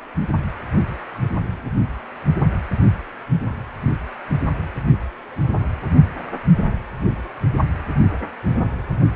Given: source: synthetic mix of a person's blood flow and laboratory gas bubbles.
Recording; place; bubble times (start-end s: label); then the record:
Doppler ultrasound of blood flow; precordium
no bubbles
From the record:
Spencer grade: 0 (complete lack of bubble signals)